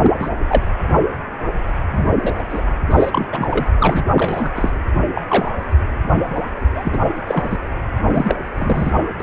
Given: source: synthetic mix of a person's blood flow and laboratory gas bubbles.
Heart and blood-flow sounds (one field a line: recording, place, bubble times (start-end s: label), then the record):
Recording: Doppler ultrasound of blood flow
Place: precordium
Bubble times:
0.03-0.12 s: bubbles
0.19-0.30 s: bubbles
0.48-0.62 s: bubbles
1.90-2.06 s: bubbles
2.21-2.33 s: bubbles
2.38-2.44 s: bubbles
2.50-2.62 s: bubbles
2.90-3.27 s: bubbles
3.33-3.67 s: bubbles
3.79-4.04 s: bubbles
4.15-4.50 s: bubbles
4.55-4.69 s: bubbles
5.14-5.21 s: bubbles
5.28-5.50 s: bubbles
6.73-6.98 s: bubbles
7.27-7.57 s: bubbles
8.09-8.35 s: bubbles
8.54-8.91 s: bubbles
9.20-9.23 s: bubbles
From the record:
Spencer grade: 3 (all of the cardiac periods contain showers or single bubble signals, but not dominating or overriding the cardiac motion signals)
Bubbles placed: anywhere in the cardiac cycle